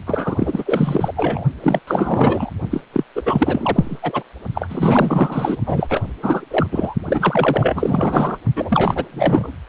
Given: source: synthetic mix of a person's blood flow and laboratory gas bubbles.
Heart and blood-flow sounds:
Doppler ultrasound of blood flow; precordium
0.06-1.14 s: bubbles
1.16-1.44 s: bubbles
1.62-1.79 s: bubbles
1.87-2.50 s: bubbles
2.71-2.81 s: bubbles
2.93-3.04 s: bubbles
3.15-3.22 s: bubbles
3.25-3.98 s: bubbles
4.02-4.23 s: bubbles
4.54-5.56 s: bubbles
5.65-6.02 s: bubbles
6.22-6.46 s: bubbles
6.50-6.67 s: bubbles
6.71-6.94 s: bubbles
7.05-8.38 s: bubbles
8.55-9.05 s: bubbles
9.11-9.54 s: bubbles
From the record:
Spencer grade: 4 (maximum detectable bubble signal sounding continuously throughout systole and diastole of every cardiac period, and overriding the amplitude of the normal cardiac signals); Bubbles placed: only in the low amplitude regions of the cardiac cycle

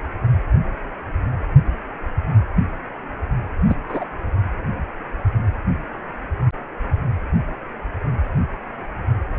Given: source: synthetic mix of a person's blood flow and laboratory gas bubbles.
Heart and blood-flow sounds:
Doppler ultrasound of blood flow; precordium
3.69-3.77 s: bubbles
3.88-4.04 s: bubbles
From the record:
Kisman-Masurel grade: 112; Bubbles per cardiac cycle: 1 to 2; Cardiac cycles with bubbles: 1 to 10%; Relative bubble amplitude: moderate (0.250 to 0.450); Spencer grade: 1 (occasional bubble signal discernible with the cardiac motion signal, with majority of cardiac periods free of bubbles); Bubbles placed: anywhere in the cardiac cycle

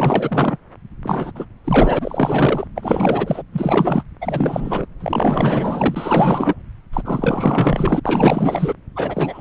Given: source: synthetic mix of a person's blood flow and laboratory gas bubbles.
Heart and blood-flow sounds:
Doppler ultrasound of blood flow; subclavian vein
0.00-0.57 s: bubbles
1.04-1.32 s: bubbles
1.35-1.45 s: bubbles
1.64-2.67 s: bubbles
2.75-3.43 s: bubbles
3.52-4.03 s: bubbles
4.21-4.86 s: bubbles
5.00-6.55 s: bubbles
6.93-8.00 s: bubbles
8.03-8.74 s: bubbles
8.96-9.41 s: bubbles
From the record:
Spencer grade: 4 (maximum detectable bubble signal sounding continuously throughout systole and diastole of every cardiac period, and overriding the amplitude of the normal cardiac signals); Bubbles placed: anywhere in the cardiac cycle

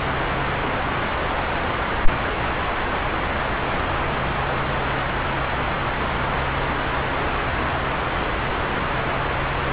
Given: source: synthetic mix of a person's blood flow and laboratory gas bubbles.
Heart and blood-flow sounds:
Doppler ultrasound of blood flow; subclavian vein
no bubbles
From the record:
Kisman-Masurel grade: 000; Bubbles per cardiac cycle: 0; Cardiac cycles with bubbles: 0%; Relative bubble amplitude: no bubbles discernible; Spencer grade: 0 (complete lack of bubble signals)

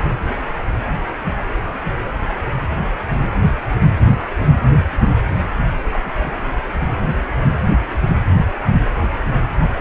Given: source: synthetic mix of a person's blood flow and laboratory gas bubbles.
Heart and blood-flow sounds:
Doppler ultrasound of blood flow; precordium
5.92-6.00 s: bubbles
6.06-6.33 s: bubbles
From the record:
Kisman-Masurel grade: 211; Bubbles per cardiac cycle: several, 3 to 8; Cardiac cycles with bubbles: 1 to 10%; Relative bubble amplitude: barely perceptible (0.100 to 0.250); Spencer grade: 1 (occasional bubble signal discernible with the cardiac motion signal, with majority of cardiac periods free of bubbles); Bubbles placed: anywhere in the cardiac cycle

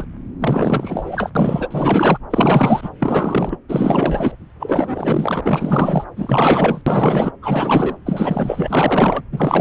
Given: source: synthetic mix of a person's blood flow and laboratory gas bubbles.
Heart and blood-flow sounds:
Doppler ultrasound of blood flow; subclavian vein
0.00-0.04 s: bubbles
0.39-1.30 s: bubbles
1.35-2.18 s: bubbles
2.30-2.90 s: bubbles
3.00-3.57 s: bubbles
3.69-4.36 s: bubbles
4.59-6.04 s: bubbles
6.16-6.82 s: bubbles
6.86-7.32 s: bubbles
7.42-7.96 s: bubbles
8.05-9.22 s: bubbles
9.32-9.61 s: bubbles
From the record:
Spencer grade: 4 (maximum detectable bubble signal sounding continuously throughout systole and diastole of every cardiac period, and overriding the amplitude of the normal cardiac signals); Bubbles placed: anywhere in the cardiac cycle

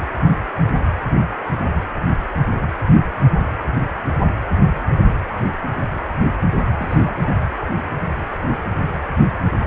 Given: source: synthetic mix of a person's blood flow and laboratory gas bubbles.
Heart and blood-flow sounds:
Doppler ultrasound of blood flow; precordium
6.79-7.33 s: bubbles
From the record:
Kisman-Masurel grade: 111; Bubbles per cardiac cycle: 1 to 2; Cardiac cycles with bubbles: 1 to 10%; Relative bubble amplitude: barely perceptible (0.100 to 0.250); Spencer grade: 1 (occasional bubble signal discernible with the cardiac motion signal, with majority of cardiac periods free of bubbles); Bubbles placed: anywhere in the cardiac cycle

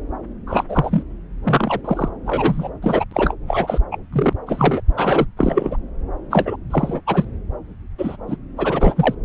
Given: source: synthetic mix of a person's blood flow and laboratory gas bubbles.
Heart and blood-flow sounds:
Doppler ultrasound of blood flow; subclavian vein
0.46-0.64 s: bubbles
0.68-1.03 s: bubbles
1.44-1.81 s: bubbles
1.84-2.09 s: bubbles
2.26-2.70 s: bubbles
2.82-3.04 s: bubbles
3.11-3.34 s: bubbles
3.47-3.80 s: bubbles
3.92-3.98 s: bubbles
4.12-4.33 s: bubbles
4.46-4.81 s: bubbles
4.96-5.26 s: bubbles
5.37-5.77 s: bubbles
6.30-6.56 s: bubbles
6.70-7.00 s: bubbles
7.06-7.25 s: bubbles
7.98-8.16 s: bubbles
8.28-8.37 s: bubbles
8.57-9.15 s: bubbles
From the record:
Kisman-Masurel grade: 243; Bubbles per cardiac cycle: several, 3 to 8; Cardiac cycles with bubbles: 100%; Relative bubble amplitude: loud (0.450 to 0.775); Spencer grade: 3 (all of the cardiac periods contain showers or single bubble signals, but not dominating or overriding the cardiac motion signals); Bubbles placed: anywhere in the cardiac cycle

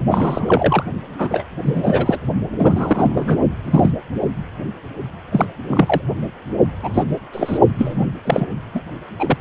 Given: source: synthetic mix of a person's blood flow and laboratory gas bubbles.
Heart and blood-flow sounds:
Doppler ultrasound of blood flow; precordium
0.08-0.83 s: bubbles
1.18-1.44 s: bubbles
1.64-2.19 s: bubbles
2.58-3.38 s: bubbles
3.65-3.91 s: bubbles
5.32-5.46 s: bubbles
5.67-6.01 s: bubbles
6.83-7.05 s: bubbles
7.33-7.59 s: bubbles
7.78-8.06 s: bubbles
8.24-8.46 s: bubbles
8.74-8.81 s: bubbles
9.20-9.37 s: bubbles
From the record:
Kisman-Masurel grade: 243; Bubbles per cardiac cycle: several, 3 to 8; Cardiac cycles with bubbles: 100%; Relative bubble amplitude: loud (0.450 to 0.775); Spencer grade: 3 (all of the cardiac periods contain showers or single bubble signals, but not dominating or overriding the cardiac motion signals); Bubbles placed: only in the low amplitude regions of the cardiac cycle

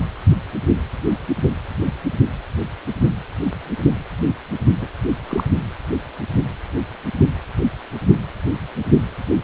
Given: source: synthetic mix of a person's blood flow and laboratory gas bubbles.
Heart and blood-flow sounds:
Doppler ultrasound of blood flow; precordium
4.81-4.87 s: bubbles
5.03-5.11 s: bubbles
5.28-5.43 s: bubbles
From the record:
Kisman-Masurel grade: 212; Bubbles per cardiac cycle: several, 3 to 8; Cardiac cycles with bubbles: 1 to 10%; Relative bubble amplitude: moderate (0.250 to 0.450); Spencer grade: 1 (occasional bubble signal discernible with the cardiac motion signal, with majority of cardiac periods free of bubbles); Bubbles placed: only in the low amplitude regions of the cardiac cycle

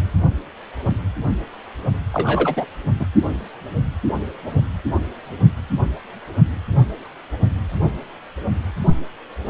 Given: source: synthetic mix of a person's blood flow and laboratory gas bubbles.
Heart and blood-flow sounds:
Doppler ultrasound of blood flow; precordium
2.12-2.66 s: bubbles
2.99-3.06 s: bubbles
From the record:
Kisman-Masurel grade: 212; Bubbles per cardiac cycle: several, 3 to 8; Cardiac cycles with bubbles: 1 to 10%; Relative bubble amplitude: moderate (0.250 to 0.450); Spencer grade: 1 (occasional bubble signal discernible with the cardiac motion signal, with majority of cardiac periods free of bubbles); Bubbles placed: only in the low amplitude regions of the cardiac cycle

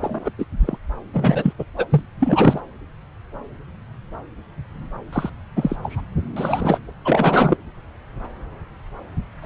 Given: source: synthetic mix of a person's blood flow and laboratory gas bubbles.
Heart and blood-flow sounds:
Doppler ultrasound of blood flow; subclavian vein
0.01-0.30 s: bubbles
0.38-0.45 s: bubbles
0.60-0.77 s: bubbles
1.13-1.53 s: bubbles
1.58-1.65 s: bubbles
1.77-1.85 s: bubbles
1.90-2.02 s: bubbles
2.20-2.60 s: bubbles
5.12-5.29 s: bubbles
5.56-5.76 s: bubbles
5.83-6.01 s: bubbles
6.36-6.80 s: bubbles
7.04-7.57 s: bubbles
9.42-9.46 s: bubbles
From the record:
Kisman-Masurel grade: 233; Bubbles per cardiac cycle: several, 3 to 8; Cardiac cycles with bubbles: 50 to 99%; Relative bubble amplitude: loud (0.450 to 0.775); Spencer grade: 3 (all of the cardiac periods contain showers or single bubble signals, but not dominating or overriding the cardiac motion signals); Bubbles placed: anywhere in the cardiac cycle

